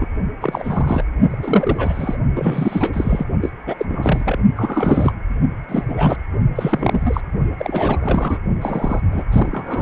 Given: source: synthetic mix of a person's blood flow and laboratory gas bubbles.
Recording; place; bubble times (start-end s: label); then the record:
Doppler ultrasound of blood flow; precordium
0.00-0.06 s: bubbles
0.41-1.03 s: bubbles
1.29-2.17 s: bubbles
2.35-3.25 s: bubbles
3.41-3.50 s: bubbles
3.66-3.76 s: bubbles
3.79-3.85 s: bubbles
3.89-4.38 s: bubbles
4.55-5.12 s: bubbles
5.68-6.16 s: bubbles
6.55-7.21 s: bubbles
7.57-8.38 s: bubbles
8.62-9.00 s: bubbles
9.12-9.24 s: bubbles
9.32-9.82 s: bubbles
From the record:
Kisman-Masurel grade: 342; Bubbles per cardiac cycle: rolling drumbeat, 9 or more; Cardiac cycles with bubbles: 100%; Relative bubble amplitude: moderate (0.250 to 0.450); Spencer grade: 3 (all of the cardiac periods contain showers or single bubble signals, but not dominating or overriding the cardiac motion signals); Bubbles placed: only in the low amplitude regions of the cardiac cycle